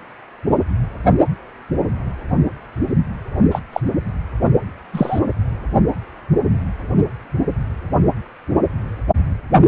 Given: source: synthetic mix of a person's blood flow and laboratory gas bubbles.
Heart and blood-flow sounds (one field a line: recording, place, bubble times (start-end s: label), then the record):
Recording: Doppler ultrasound of blood flow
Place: precordium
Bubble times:
3.51-3.59 s: bubbles
3.73-3.81 s: bubbles
4.93-5.20 s: bubbles
From the record:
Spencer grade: 2 (many but less than half of the cardiac periods contain bubble signals, singularly or in groups)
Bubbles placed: only in the low amplitude regions of the cardiac cycle